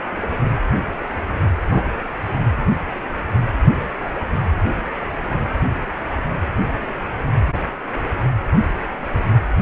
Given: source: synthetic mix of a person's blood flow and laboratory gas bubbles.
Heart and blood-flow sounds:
Doppler ultrasound of blood flow; precordium
1.71-1.83 s: bubbles
From the record:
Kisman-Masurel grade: 113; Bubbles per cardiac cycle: 1 to 2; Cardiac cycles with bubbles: 1 to 10%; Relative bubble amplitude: loud (0.450 to 0.775); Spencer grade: 1 (occasional bubble signal discernible with the cardiac motion signal, with majority of cardiac periods free of bubbles); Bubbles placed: anywhere in the cardiac cycle

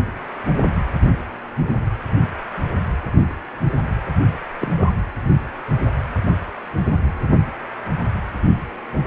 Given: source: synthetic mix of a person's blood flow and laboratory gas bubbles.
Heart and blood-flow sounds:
Doppler ultrasound of blood flow; precordium
4.61-4.73 s: bubbles
4.76-4.91 s: bubbles
From the record:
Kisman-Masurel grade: 112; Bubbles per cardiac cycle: 1 to 2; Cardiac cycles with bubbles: 1 to 10%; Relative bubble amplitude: moderate (0.250 to 0.450); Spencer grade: 1 (occasional bubble signal discernible with the cardiac motion signal, with majority of cardiac periods free of bubbles); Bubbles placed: anywhere in the cardiac cycle

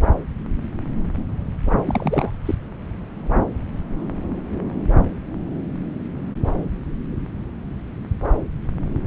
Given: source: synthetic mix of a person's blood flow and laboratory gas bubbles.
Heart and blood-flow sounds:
Doppler ultrasound of blood flow; subclavian vein
1.85-2.32 s: bubbles
2.45-2.55 s: bubbles
From the record:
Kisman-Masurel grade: 212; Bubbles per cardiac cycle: several, 3 to 8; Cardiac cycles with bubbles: 1 to 10%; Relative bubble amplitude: moderate (0.250 to 0.450); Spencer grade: 1 (occasional bubble signal discernible with the cardiac motion signal, with majority of cardiac periods free of bubbles); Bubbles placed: anywhere in the cardiac cycle

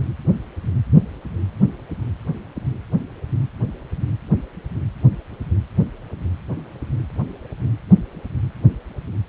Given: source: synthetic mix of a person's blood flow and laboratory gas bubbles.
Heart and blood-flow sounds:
Doppler ultrasound of blood flow; precordium
no bubbles
From the record:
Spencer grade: 0 (complete lack of bubble signals)

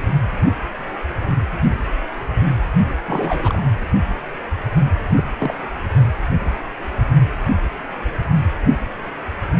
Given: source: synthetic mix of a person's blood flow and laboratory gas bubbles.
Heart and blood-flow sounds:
Doppler ultrasound of blood flow; precordium
3.07-3.62 s: bubbles
5.17-5.29 s: bubbles
5.38-5.55 s: bubbles
From the record:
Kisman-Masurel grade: 221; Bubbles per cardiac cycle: several, 3 to 8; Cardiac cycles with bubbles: 10 to 50%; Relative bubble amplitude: barely perceptible (0.100 to 0.250); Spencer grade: 2 (many but less than half of the cardiac periods contain bubble signals, singularly or in groups); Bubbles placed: anywhere in the cardiac cycle

